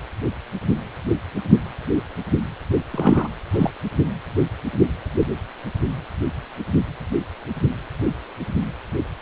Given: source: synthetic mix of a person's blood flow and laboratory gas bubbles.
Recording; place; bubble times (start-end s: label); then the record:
Doppler ultrasound of blood flow; precordium
2.92-3.29 s: bubbles
3.54-3.70 s: bubbles
From the record:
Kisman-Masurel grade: 213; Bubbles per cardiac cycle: several, 3 to 8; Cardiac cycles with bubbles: 1 to 10%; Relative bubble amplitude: loud (0.450 to 0.775); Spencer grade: 1 (occasional bubble signal discernible with the cardiac motion signal, with majority of cardiac periods free of bubbles); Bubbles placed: only in the low amplitude regions of the cardiac cycle